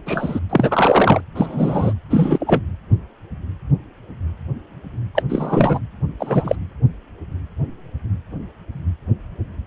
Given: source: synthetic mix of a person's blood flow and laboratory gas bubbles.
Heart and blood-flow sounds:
Doppler ultrasound of blood flow; precordium
0.06-0.40 s: bubbles
0.50-1.21 s: bubbles
1.34-1.94 s: bubbles
2.10-2.61 s: bubbles
5.15-5.23 s: bubbles
5.29-5.80 s: bubbles
6.20-6.56 s: bubbles
From the record:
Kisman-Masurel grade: 223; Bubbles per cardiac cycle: several, 3 to 8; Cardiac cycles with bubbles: 10 to 50%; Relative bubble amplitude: loud (0.450 to 0.775); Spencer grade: 2 (many but less than half of the cardiac periods contain bubble signals, singularly or in groups); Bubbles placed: anywhere in the cardiac cycle

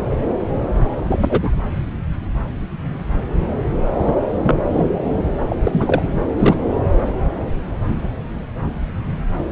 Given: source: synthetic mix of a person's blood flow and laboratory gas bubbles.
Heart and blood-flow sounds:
Doppler ultrasound of blood flow; subclavian vein
0.00-0.04 s: bubbles
1.05-1.55 s: bubbles
4.00-4.15 s: bubbles
4.42-4.59 s: bubbles
4.68-4.90 s: bubbles
5.08-5.16 s: bubbles
5.46-5.57 s: bubbles
5.63-6.03 s: bubbles
6.37-6.55 s: bubbles
From the record:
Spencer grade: 2 (many but less than half of the cardiac periods contain bubble signals, singularly or in groups); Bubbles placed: anywhere in the cardiac cycle

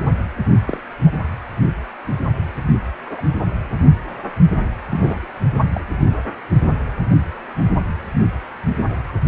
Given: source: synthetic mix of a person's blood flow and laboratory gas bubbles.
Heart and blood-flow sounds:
Doppler ultrasound of blood flow; precordium
0.66-0.79 s: bubbles
1.06-1.10 s: bubbles
3.06-3.21 s: bubbles
4.90-5.18 s: bubbles
5.73-5.80 s: bubbles
From the record:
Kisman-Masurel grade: 122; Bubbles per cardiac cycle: 1 to 2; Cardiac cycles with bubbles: 10 to 50%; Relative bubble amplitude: moderate (0.250 to 0.450); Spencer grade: 2 (many but less than half of the cardiac periods contain bubble signals, singularly or in groups); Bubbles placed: anywhere in the cardiac cycle

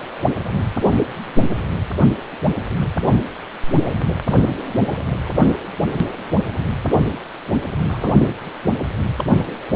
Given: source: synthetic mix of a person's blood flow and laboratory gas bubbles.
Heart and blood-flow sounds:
Doppler ultrasound of blood flow; precordium
7.87-8.14 s: bubbles
9.17-9.25 s: bubbles
From the record:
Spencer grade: 2 (many but less than half of the cardiac periods contain bubble signals, singularly or in groups); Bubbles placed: anywhere in the cardiac cycle

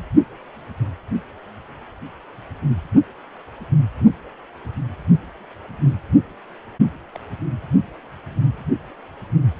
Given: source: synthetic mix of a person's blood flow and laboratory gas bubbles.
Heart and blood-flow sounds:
Doppler ultrasound of blood flow; precordium
7.13-7.18 s: bubbles
From the record:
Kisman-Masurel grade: 111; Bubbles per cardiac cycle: 1 to 2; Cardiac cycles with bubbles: 1 to 10%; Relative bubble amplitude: barely perceptible (0.100 to 0.250); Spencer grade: 1 (occasional bubble signal discernible with the cardiac motion signal, with majority of cardiac periods free of bubbles); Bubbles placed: anywhere in the cardiac cycle

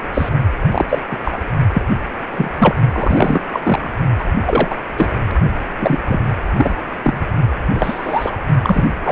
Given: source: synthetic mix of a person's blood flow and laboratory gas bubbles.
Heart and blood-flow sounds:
Doppler ultrasound of blood flow; precordium
0.14-0.29 s: bubbles
0.71-0.85 s: bubbles
0.89-0.99 s: bubbles
1.10-1.16 s: bubbles
1.24-1.38 s: bubbles
1.73-1.82 s: bubbles
2.31-2.50 s: bubbles
2.58-2.75 s: bubbles
2.92-3.42 s: bubbles
3.53-3.91 s: bubbles
4.19-4.24 s: bubbles
4.45-4.75 s: bubbles
4.97-5.09 s: bubbles
5.79-6.00 s: bubbles
6.06-6.20 s: bubbles
6.57-6.76 s: bubbles
7.02-7.29 s: bubbles
7.75-8.36 s: bubbles
8.62-8.85 s: bubbles
9.04-9.12 s: bubbles
From the record:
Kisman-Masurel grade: 233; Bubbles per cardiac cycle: several, 3 to 8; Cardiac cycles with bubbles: 50 to 99%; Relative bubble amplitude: loud (0.450 to 0.775); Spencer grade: 3 (all of the cardiac periods contain showers or single bubble signals, but not dominating or overriding the cardiac motion signals); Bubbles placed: only in the low amplitude regions of the cardiac cycle

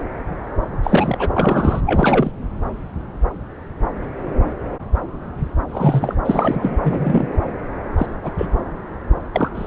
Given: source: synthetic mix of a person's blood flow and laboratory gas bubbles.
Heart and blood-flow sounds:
Doppler ultrasound of blood flow; subclavian vein
0.83-1.29 s: bubbles
1.34-1.80 s: bubbles
1.86-2.31 s: bubbles
5.69-6.15 s: bubbles
6.24-6.76 s: bubbles
6.83-7.27 s: bubbles
7.98-8.06 s: bubbles
8.23-8.31 s: bubbles
8.38-8.46 s: bubbles
9.33-9.49 s: bubbles
9.54-9.67 s: bubbles
From the record:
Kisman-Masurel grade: 233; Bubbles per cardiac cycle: several, 3 to 8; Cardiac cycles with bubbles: 50 to 99%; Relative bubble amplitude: loud (0.450 to 0.775); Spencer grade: 3 (all of the cardiac periods contain showers or single bubble signals, but not dominating or overriding the cardiac motion signals); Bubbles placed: anywhere in the cardiac cycle

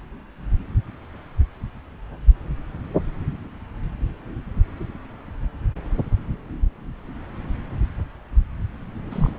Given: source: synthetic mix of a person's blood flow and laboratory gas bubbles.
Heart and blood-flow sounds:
Doppler ultrasound of blood flow; subclavian vein
9.11-9.30 s: bubbles
From the record:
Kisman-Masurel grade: 211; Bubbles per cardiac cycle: several, 3 to 8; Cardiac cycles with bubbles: 1 to 10%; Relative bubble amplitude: barely perceptible (0.100 to 0.250); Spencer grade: 1 (occasional bubble signal discernible with the cardiac motion signal, with majority of cardiac periods free of bubbles); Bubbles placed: anywhere in the cardiac cycle

